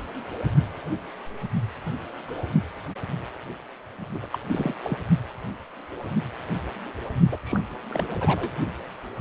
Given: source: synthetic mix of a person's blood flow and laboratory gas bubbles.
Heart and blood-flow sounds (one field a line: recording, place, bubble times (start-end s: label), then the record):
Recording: Doppler ultrasound of blood flow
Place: precordium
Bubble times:
4.14-4.19 s: bubbles
4.22-4.26 s: bubbles
4.33-4.39 s: bubbles
4.47-4.73 s: bubbles
4.83-5.02 s: bubbles
7.32-7.37 s: bubbles
7.45-7.60 s: bubbles
7.89-8.14 s: bubbles
8.21-8.50 s: bubbles
From the record:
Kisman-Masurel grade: 221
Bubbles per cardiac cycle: several, 3 to 8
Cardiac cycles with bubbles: 10 to 50%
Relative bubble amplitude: barely perceptible (0.100 to 0.250)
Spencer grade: 2 (many but less than half of the cardiac periods contain bubble signals, singularly or in groups)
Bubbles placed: only in the low amplitude regions of the cardiac cycle